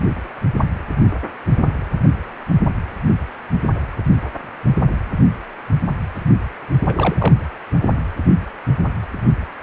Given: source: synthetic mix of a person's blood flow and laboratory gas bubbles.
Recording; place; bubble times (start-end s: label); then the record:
Doppler ultrasound of blood flow; precordium
6.88-6.94 s: bubbles
6.96-7.15 s: bubbles
7.18-7.33 s: bubbles
From the record:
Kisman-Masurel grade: 212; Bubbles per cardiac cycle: several, 3 to 8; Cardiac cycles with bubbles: 1 to 10%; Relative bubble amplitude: moderate (0.250 to 0.450); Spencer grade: 1 (occasional bubble signal discernible with the cardiac motion signal, with majority of cardiac periods free of bubbles); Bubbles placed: anywhere in the cardiac cycle